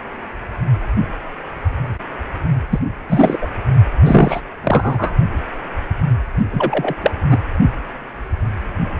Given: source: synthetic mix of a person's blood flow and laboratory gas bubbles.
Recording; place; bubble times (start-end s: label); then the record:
Doppler ultrasound of blood flow; precordium
2.71-2.79 s: bubbles
3.09-3.50 s: bubbles
4.02-4.41 s: bubbles
4.63-5.15 s: bubbles
6.51-6.95 s: bubbles
7.02-7.11 s: bubbles
7.30-7.38 s: bubbles
From the record:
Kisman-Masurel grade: 223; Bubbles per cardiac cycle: several, 3 to 8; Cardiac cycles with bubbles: 10 to 50%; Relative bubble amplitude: loud (0.450 to 0.775); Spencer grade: 2 (many but less than half of the cardiac periods contain bubble signals, singularly or in groups); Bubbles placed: only in the low amplitude regions of the cardiac cycle